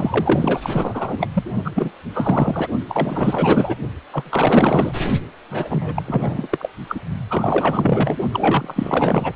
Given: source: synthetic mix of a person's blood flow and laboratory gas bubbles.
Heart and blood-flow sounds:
Doppler ultrasound of blood flow; precordium
0.00-1.28 s: bubbles
1.33-1.43 s: bubbles
1.64-1.71 s: bubbles
1.75-1.92 s: bubbles
2.14-2.68 s: bubbles
2.88-3.75 s: bubbles
4.11-4.92 s: bubbles
5.50-6.02 s: bubbles
6.07-6.47 s: bubbles
6.51-6.69 s: bubbles
6.88-6.99 s: bubbles
7.29-8.17 s: bubbles
8.32-9.32 s: bubbles
From the record:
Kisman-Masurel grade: 444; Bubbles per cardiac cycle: continuous sound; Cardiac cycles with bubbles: 100%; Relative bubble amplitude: maximal (0.775 to 0.999); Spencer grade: 4 (maximum detectable bubble signal sounding continuously throughout systole and diastole of every cardiac period, and overriding the amplitude of the normal cardiac signals); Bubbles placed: only in the low amplitude regions of the cardiac cycle

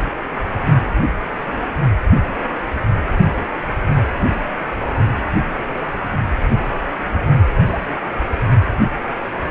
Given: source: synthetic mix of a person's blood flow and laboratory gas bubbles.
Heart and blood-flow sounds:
Doppler ultrasound of blood flow; precordium
7.67-7.86 s: bubbles
From the record:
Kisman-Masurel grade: 111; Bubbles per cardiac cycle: 1 to 2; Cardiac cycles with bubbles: 1 to 10%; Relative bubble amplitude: barely perceptible (0.100 to 0.250); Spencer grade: 1 (occasional bubble signal discernible with the cardiac motion signal, with majority of cardiac periods free of bubbles); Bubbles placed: anywhere in the cardiac cycle

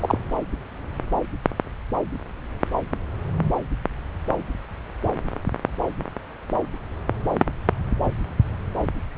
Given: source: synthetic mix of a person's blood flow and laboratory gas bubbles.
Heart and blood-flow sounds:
Doppler ultrasound of blood flow; subclavian vein
0.00-0.17 s: bubbles
From the record:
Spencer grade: 1 (occasional bubble signal discernible with the cardiac motion signal, with majority of cardiac periods free of bubbles); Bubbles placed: anywhere in the cardiac cycle

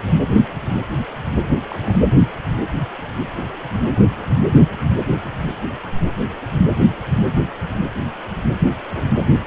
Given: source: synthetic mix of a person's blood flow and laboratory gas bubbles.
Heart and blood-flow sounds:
Doppler ultrasound of blood flow; precordium
1.68-1.99 s: bubbles
From the record:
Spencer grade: 1 (occasional bubble signal discernible with the cardiac motion signal, with majority of cardiac periods free of bubbles); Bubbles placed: anywhere in the cardiac cycle

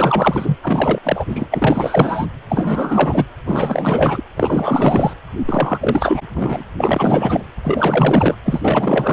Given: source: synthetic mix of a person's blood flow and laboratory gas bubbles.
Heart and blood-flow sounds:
Doppler ultrasound of blood flow; precordium
0.00-0.56 s: bubbles
0.62-1.00 s: bubbles
1.04-1.26 s: bubbles
1.28-1.47 s: bubbles
1.51-2.26 s: bubbles
2.49-3.25 s: bubbles
3.46-4.22 s: bubbles
4.36-5.13 s: bubbles
5.46-5.78 s: bubbles
5.81-6.21 s: bubbles
6.33-6.64 s: bubbles
6.79-7.43 s: bubbles
7.63-8.36 s: bubbles
8.44-9.13 s: bubbles
From the record:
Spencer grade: 4 (maximum detectable bubble signal sounding continuously throughout systole and diastole of every cardiac period, and overriding the amplitude of the normal cardiac signals); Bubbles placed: anywhere in the cardiac cycle

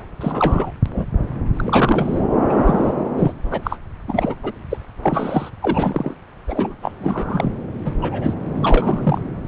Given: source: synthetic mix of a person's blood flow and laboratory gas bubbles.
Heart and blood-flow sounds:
Doppler ultrasound of blood flow; subclavian vein
0.21-0.71 s: bubbles
0.85-1.06 s: bubbles
1.57-2.22 s: bubbles
2.49-2.94 s: bubbles
3.18-3.33 s: bubbles
3.50-3.79 s: bubbles
4.08-4.36 s: bubbles
4.43-4.52 s: bubbles
4.70-4.78 s: bubbles
5.03-5.50 s: bubbles
5.62-6.15 s: bubbles
6.47-6.75 s: bubbles
6.82-6.92 s: bubbles
7.00-7.50 s: bubbles
7.85-7.94 s: bubbles
8.01-8.34 s: bubbles
8.56-9.21 s: bubbles
9.44-9.47 s: bubbles
From the record:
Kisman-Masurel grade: 243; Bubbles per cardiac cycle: several, 3 to 8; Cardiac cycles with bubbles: 100%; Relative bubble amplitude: loud (0.450 to 0.775); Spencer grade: 3 (all of the cardiac periods contain showers or single bubble signals, but not dominating or overriding the cardiac motion signals); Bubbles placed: anywhere in the cardiac cycle

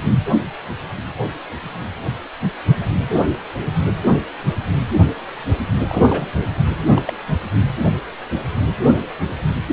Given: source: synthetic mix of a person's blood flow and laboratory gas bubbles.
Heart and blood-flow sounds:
Doppler ultrasound of blood flow; precordium
5.88-6.26 s: bubbles
6.78-7.02 s: bubbles
7.05-7.12 s: bubbles
From the record:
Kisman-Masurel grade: 222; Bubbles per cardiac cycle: several, 3 to 8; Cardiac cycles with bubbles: 10 to 50%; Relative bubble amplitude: moderate (0.250 to 0.450); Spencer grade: 2 (many but less than half of the cardiac periods contain bubble signals, singularly or in groups); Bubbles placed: anywhere in the cardiac cycle

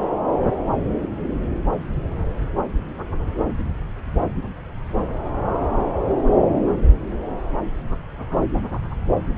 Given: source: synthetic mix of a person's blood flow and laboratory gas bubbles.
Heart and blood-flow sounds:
Doppler ultrasound of blood flow; subclavian vein
no bubbles
From the record:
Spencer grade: 0 (complete lack of bubble signals)

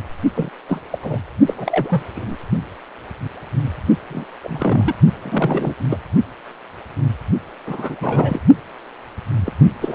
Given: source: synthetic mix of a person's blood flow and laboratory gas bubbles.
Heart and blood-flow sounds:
Doppler ultrasound of blood flow; precordium
0.35-0.50 s: bubbles
0.68-0.80 s: bubbles
0.91-0.98 s: bubbles
1.02-1.19 s: bubbles
1.46-1.54 s: bubbles
1.57-2.02 s: bubbles
2.15-2.36 s: bubbles
4.10-4.26 s: bubbles
4.43-4.95 s: bubbles
5.22-5.75 s: bubbles
5.89-5.97 s: bubbles
7.66-7.96 s: bubbles
8.01-8.41 s: bubbles
9.46-9.52 s: bubbles
9.81-9.95 s: bubbles
From the record:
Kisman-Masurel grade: 232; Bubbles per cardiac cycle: several, 3 to 8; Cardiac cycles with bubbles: 50 to 99%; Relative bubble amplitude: moderate (0.250 to 0.450); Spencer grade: 3 (all of the cardiac periods contain showers or single bubble signals, but not dominating or overriding the cardiac motion signals); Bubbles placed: only in the low amplitude regions of the cardiac cycle

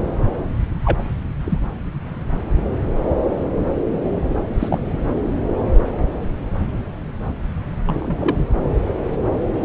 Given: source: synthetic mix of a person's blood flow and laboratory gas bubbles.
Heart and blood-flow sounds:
Doppler ultrasound of blood flow; subclavian vein
0.83-1.10 s: bubbles
1.44-1.58 s: bubbles
4.59-4.79 s: bubbles
7.86-8.16 s: bubbles
8.20-8.35 s: bubbles
From the record:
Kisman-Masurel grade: 122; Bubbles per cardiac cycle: 1 to 2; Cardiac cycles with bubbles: 10 to 50%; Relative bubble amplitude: moderate (0.250 to 0.450); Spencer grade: 2 (many but less than half of the cardiac periods contain bubble signals, singularly or in groups); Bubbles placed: anywhere in the cardiac cycle

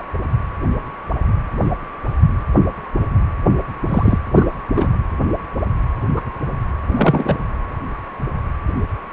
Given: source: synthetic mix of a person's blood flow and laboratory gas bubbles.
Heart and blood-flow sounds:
Doppler ultrasound of blood flow; precordium
3.89-4.18 s: bubbles
4.33-4.49 s: bubbles
4.76-4.89 s: bubbles
6.16-6.21 s: bubbles
6.87-7.38 s: bubbles
From the record:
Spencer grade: 2 (many but less than half of the cardiac periods contain bubble signals, singularly or in groups); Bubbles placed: anywhere in the cardiac cycle

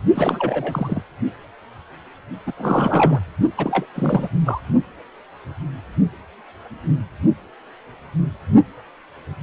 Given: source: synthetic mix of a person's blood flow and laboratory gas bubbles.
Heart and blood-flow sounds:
Doppler ultrasound of blood flow; precordium
0.14-1.02 s: bubbles
2.46-2.52 s: bubbles
2.57-3.19 s: bubbles
3.57-3.86 s: bubbles
3.96-4.28 s: bubbles
4.45-4.61 s: bubbles
From the record:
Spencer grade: 3 (all of the cardiac periods contain showers or single bubble signals, but not dominating or overriding the cardiac motion signals); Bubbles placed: only in the low amplitude regions of the cardiac cycle

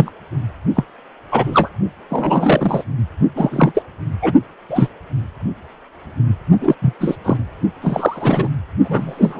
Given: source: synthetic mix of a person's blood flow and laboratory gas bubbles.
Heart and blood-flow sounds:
Doppler ultrasound of blood flow; precordium
0.00-0.11 s: bubbles
0.76-0.84 s: bubbles
1.31-1.69 s: bubbles
2.09-2.85 s: bubbles
3.35-3.72 s: bubbles
3.74-3.82 s: bubbles
4.21-4.32 s: bubbles
4.69-4.88 s: bubbles
6.60-6.75 s: bubbles
6.81-6.93 s: bubbles
7.00-7.17 s: bubbles
7.24-7.37 s: bubbles
7.81-8.47 s: bubbles
8.84-9.40 s: bubbles
From the record:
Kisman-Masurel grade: 243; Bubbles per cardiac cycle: several, 3 to 8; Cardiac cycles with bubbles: 100%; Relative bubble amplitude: loud (0.450 to 0.775); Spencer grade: 3 (all of the cardiac periods contain showers or single bubble signals, but not dominating or overriding the cardiac motion signals); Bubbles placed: only in the low amplitude regions of the cardiac cycle

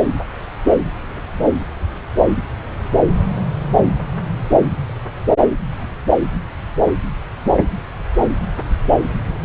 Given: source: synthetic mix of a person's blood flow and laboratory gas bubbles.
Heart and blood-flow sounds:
Doppler ultrasound of blood flow; subclavian vein
1.41-1.52 s: bubbles
2.14-2.28 s: bubbles
3.34-3.44 s: bubbles
5.66-5.76 s: bubbles
5.79-5.92 s: bubbles
From the record:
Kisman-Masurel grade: 121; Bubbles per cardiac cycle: 1 to 2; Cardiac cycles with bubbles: 10 to 50%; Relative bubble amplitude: barely perceptible (0.100 to 0.250); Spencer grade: 2 (many but less than half of the cardiac periods contain bubble signals, singularly or in groups); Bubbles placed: anywhere in the cardiac cycle

